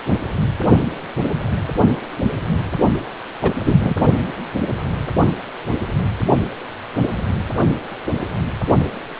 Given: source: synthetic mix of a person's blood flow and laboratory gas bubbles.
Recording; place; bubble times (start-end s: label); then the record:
Doppler ultrasound of blood flow; precordium
3.42-3.51 s: bubbles
3.66-3.95 s: bubbles
From the record:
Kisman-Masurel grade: 213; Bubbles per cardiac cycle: several, 3 to 8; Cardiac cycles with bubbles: 1 to 10%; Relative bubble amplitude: loud (0.450 to 0.775); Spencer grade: 1 (occasional bubble signal discernible with the cardiac motion signal, with majority of cardiac periods free of bubbles); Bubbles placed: only in the low amplitude regions of the cardiac cycle